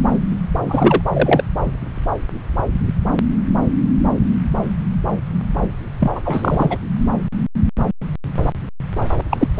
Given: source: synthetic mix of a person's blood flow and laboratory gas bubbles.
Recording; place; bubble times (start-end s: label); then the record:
Doppler ultrasound of blood flow; subclavian vein
0.64-1.01 s: bubbles
1.13-1.44 s: bubbles
6.00-6.12 s: bubbles
6.15-6.21 s: bubbles
6.25-6.77 s: bubbles
9.29-9.47 s: bubbles
From the record:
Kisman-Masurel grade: 223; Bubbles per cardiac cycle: several, 3 to 8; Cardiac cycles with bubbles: 10 to 50%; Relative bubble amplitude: loud (0.450 to 0.775); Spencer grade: 2 (many but less than half of the cardiac periods contain bubble signals, singularly or in groups); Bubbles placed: anywhere in the cardiac cycle